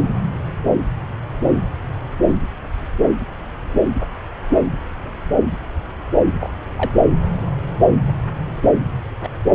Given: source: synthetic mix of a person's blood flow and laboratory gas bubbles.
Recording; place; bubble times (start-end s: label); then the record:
Doppler ultrasound of blood flow; subclavian vein
6.40-6.49 s: bubbles
6.76-6.91 s: bubbles
9.23-9.28 s: bubbles
From the record:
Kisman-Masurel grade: 122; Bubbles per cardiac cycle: 1 to 2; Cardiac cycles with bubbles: 10 to 50%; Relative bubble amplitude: moderate (0.250 to 0.450); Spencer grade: 2 (many but less than half of the cardiac periods contain bubble signals, singularly or in groups); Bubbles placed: anywhere in the cardiac cycle